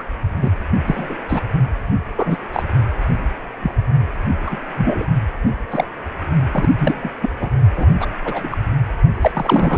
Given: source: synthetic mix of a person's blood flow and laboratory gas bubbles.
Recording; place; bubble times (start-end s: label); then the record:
Doppler ultrasound of blood flow; precordium
0.00-0.02 s: bubbles
0.41-0.51 s: bubbles
0.86-1.18 s: bubbles
1.28-1.41 s: bubbles
2.16-2.37 s: bubbles
2.53-2.63 s: bubbles
3.62-3.75 s: bubbles
4.46-4.60 s: bubbles
4.77-5.04 s: bubbles
5.71-5.85 s: bubbles
6.53-6.67 s: bubbles
6.78-7.11 s: bubbles
7.21-7.30 s: bubbles
7.36-7.55 s: bubbles
7.75-7.86 s: bubbles
8.00-8.06 s: bubbles
8.25-8.56 s: bubbles
9.21-9.78 s: bubbles
From the record:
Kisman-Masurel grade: 243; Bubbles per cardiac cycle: several, 3 to 8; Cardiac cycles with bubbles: 100%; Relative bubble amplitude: loud (0.450 to 0.775); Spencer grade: 3 (all of the cardiac periods contain showers or single bubble signals, but not dominating or overriding the cardiac motion signals); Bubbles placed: only in the low amplitude regions of the cardiac cycle